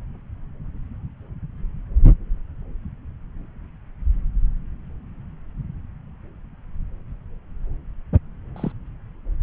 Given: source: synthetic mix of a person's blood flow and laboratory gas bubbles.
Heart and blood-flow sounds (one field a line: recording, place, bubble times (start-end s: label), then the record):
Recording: Doppler ultrasound of blood flow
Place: subclavian vein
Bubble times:
8.56-8.72 s: bubbles
From the record:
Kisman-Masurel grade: 111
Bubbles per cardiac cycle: 1 to 2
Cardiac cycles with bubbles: 1 to 10%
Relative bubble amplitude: barely perceptible (0.100 to 0.250)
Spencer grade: 1 (occasional bubble signal discernible with the cardiac motion signal, with majority of cardiac periods free of bubbles)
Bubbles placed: anywhere in the cardiac cycle